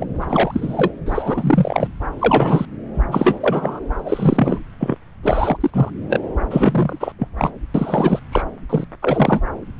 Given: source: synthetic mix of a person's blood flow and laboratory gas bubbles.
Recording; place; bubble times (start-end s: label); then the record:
Doppler ultrasound of blood flow; subclavian vein
0.00-0.05 s: bubbles
0.21-0.27 s: bubbles
0.29-0.93 s: bubbles
1.06-1.92 s: bubbles
2.19-2.65 s: bubbles
2.94-3.79 s: bubbles
4.06-4.59 s: bubbles
4.80-4.96 s: bubbles
5.23-5.57 s: bubbles
5.60-5.71 s: bubbles
5.74-5.90 s: bubbles
6.08-6.20 s: bubbles
6.50-7.12 s: bubbles
7.19-7.28 s: bubbles
7.37-7.51 s: bubbles
7.74-8.20 s: bubbles
8.31-8.42 s: bubbles
8.69-8.84 s: bubbles
9.02-9.40 s: bubbles
From the record:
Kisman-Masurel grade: 343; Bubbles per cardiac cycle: rolling drumbeat, 9 or more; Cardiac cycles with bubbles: 100%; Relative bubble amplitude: loud (0.450 to 0.775); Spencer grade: 3 (all of the cardiac periods contain showers or single bubble signals, but not dominating or overriding the cardiac motion signals); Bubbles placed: anywhere in the cardiac cycle